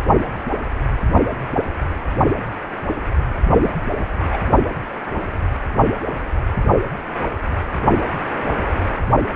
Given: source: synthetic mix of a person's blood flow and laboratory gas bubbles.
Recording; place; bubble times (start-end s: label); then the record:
Doppler ultrasound of blood flow; precordium
3.62-3.71 s: bubbles
4.31-4.38 s: bubbles
From the record:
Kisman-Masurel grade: 112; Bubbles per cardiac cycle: 1 to 2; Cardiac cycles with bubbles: 1 to 10%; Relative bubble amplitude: moderate (0.250 to 0.450); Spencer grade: 1 (occasional bubble signal discernible with the cardiac motion signal, with majority of cardiac periods free of bubbles); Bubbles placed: only in the low amplitude regions of the cardiac cycle